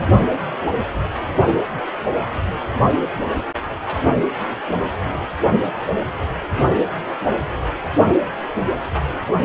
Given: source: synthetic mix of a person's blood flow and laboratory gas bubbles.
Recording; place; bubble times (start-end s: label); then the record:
Doppler ultrasound of blood flow; precordium
3.85-4.11 s: bubbles
9.26-9.34 s: bubbles
From the record:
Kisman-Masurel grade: 121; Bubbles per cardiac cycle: 1 to 2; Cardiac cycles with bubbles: 10 to 50%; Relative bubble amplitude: barely perceptible (0.100 to 0.250); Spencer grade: 2 (many but less than half of the cardiac periods contain bubble signals, singularly or in groups); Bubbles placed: anywhere in the cardiac cycle